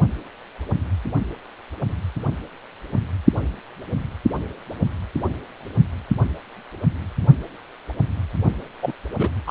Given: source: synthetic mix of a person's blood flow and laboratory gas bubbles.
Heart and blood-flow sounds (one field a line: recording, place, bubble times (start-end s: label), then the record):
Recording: Doppler ultrasound of blood flow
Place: precordium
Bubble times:
8.82-8.93 s: bubbles
9.19-9.30 s: bubbles
9.46-9.51 s: bubbles
From the record:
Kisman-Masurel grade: 222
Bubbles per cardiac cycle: several, 3 to 8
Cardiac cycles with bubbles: 10 to 50%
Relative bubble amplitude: moderate (0.250 to 0.450)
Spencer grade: 2 (many but less than half of the cardiac periods contain bubble signals, singularly or in groups)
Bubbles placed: only in the low amplitude regions of the cardiac cycle